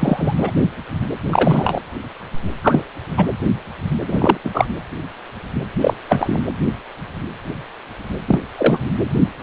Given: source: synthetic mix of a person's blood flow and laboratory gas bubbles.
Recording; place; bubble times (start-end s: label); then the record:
Doppler ultrasound of blood flow; precordium
0.00-0.51 s: bubbles
1.23-1.79 s: bubbles
2.63-2.83 s: bubbles
3.17-3.26 s: bubbles
4.07-4.38 s: bubbles
4.44-4.50 s: bubbles
4.54-4.67 s: bubbles
5.80-5.94 s: bubbles
6.08-6.41 s: bubbles
8.28-8.39 s: bubbles
8.57-8.81 s: bubbles
8.85-8.91 s: bubbles
From the record:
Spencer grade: 2 (many but less than half of the cardiac periods contain bubble signals, singularly or in groups); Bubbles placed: anywhere in the cardiac cycle